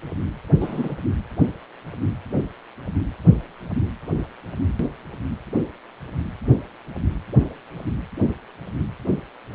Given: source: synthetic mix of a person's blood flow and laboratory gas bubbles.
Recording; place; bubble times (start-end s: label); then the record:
Doppler ultrasound of blood flow; precordium
0.60-0.94 s: bubbles
From the record:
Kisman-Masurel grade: 113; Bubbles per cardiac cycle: 1 to 2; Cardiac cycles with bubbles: 1 to 10%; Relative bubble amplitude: loud (0.450 to 0.775); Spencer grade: 1 (occasional bubble signal discernible with the cardiac motion signal, with majority of cardiac periods free of bubbles); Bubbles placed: anywhere in the cardiac cycle